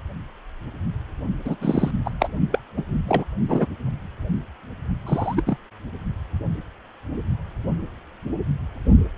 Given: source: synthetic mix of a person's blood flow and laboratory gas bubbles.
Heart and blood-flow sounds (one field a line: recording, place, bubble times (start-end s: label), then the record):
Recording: Doppler ultrasound of blood flow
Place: precordium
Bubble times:
1.45-1.55 s: bubbles
1.60-1.91 s: bubbles
2.05-2.10 s: bubbles
2.20-2.28 s: bubbles
2.52-2.59 s: bubbles
2.77-2.83 s: bubbles
3.08-3.25 s: bubbles
3.48-3.67 s: bubbles
5.07-5.42 s: bubbles
5.46-5.57 s: bubbles
From the record:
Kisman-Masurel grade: 222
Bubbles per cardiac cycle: several, 3 to 8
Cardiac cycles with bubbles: 10 to 50%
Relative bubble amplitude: moderate (0.250 to 0.450)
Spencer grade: 2 (many but less than half of the cardiac periods contain bubble signals, singularly or in groups)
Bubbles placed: only in the low amplitude regions of the cardiac cycle